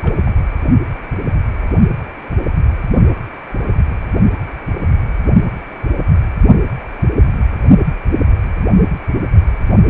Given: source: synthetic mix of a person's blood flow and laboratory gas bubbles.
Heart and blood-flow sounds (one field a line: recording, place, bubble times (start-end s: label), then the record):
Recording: Doppler ultrasound of blood flow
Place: precordium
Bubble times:
0.01-0.15 s: bubbles
0.24-0.32 s: bubbles
From the record:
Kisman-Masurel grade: 111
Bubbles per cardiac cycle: 1 to 2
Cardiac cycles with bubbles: 1 to 10%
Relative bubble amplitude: barely perceptible (0.100 to 0.250)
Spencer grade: 1 (occasional bubble signal discernible with the cardiac motion signal, with majority of cardiac periods free of bubbles)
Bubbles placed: only in the low amplitude regions of the cardiac cycle